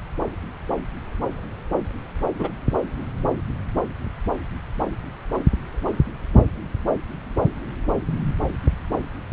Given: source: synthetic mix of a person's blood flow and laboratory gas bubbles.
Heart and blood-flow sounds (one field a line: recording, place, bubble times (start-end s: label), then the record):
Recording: Doppler ultrasound of blood flow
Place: subclavian vein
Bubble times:
2.38-2.48 s: bubbles
From the record:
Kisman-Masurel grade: 113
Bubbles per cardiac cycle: 1 to 2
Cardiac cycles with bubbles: 1 to 10%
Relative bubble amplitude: loud (0.450 to 0.775)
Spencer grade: 1 (occasional bubble signal discernible with the cardiac motion signal, with majority of cardiac periods free of bubbles)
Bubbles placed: anywhere in the cardiac cycle